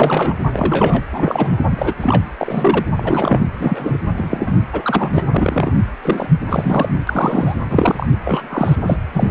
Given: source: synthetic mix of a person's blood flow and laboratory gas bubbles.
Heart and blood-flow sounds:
Doppler ultrasound of blood flow; precordium
0.00-0.35 s: bubbles
0.53-1.02 s: bubbles
1.12-1.56 s: bubbles
1.71-1.94 s: bubbles
2.00-2.24 s: bubbles
2.38-2.84 s: bubbles
2.96-3.41 s: bubbles
3.59-3.97 s: bubbles
4.16-4.53 s: bubbles
4.73-5.24 s: bubbles
5.30-5.74 s: bubbles
6.03-6.29 s: bubbles
6.46-6.93 s: bubbles
7.07-7.56 s: bubbles
7.69-8.06 s: bubbles
8.25-8.76 s: bubbles
8.83-8.97 s: bubbles
9.13-9.31 s: bubbles
From the record:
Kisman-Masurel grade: 242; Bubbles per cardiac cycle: several, 3 to 8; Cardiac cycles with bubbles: 100%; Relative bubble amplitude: moderate (0.250 to 0.450); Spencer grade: 3 (all of the cardiac periods contain showers or single bubble signals, but not dominating or overriding the cardiac motion signals); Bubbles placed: anywhere in the cardiac cycle

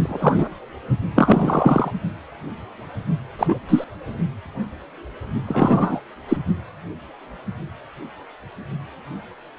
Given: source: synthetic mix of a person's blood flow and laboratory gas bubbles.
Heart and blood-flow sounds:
Doppler ultrasound of blood flow; precordium
0.00-0.49 s: bubbles
1.16-1.90 s: bubbles
3.38-3.60 s: bubbles
3.69-3.84 s: bubbles
5.48-6.00 s: bubbles
6.29-6.37 s: bubbles
From the record:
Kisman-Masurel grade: 233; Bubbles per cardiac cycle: several, 3 to 8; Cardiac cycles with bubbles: 50 to 99%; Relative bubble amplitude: loud (0.450 to 0.775); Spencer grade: 3 (all of the cardiac periods contain showers or single bubble signals, but not dominating or overriding the cardiac motion signals); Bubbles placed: only in the low amplitude regions of the cardiac cycle

